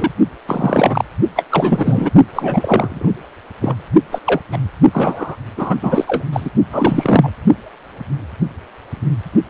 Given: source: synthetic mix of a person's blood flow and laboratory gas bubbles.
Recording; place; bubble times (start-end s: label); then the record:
Doppler ultrasound of blood flow; precordium
0.00-0.11 s: bubbles
0.46-1.04 s: bubbles
1.36-1.44 s: bubbles
1.50-2.10 s: bubbles
2.31-3.11 s: bubbles
3.61-3.83 s: bubbles
4.11-4.20 s: bubbles
4.25-4.40 s: bubbles
4.52-4.58 s: bubbles
4.92-5.36 s: bubbles
5.57-5.75 s: bubbles
5.81-6.24 s: bubbles
6.33-6.50 s: bubbles
6.71-7.31 s: bubbles
From the record:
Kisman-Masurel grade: 333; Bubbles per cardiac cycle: rolling drumbeat, 9 or more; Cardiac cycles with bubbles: 50 to 99%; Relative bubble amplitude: loud (0.450 to 0.775); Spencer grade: 3 (all of the cardiac periods contain showers or single bubble signals, but not dominating or overriding the cardiac motion signals); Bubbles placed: only in the low amplitude regions of the cardiac cycle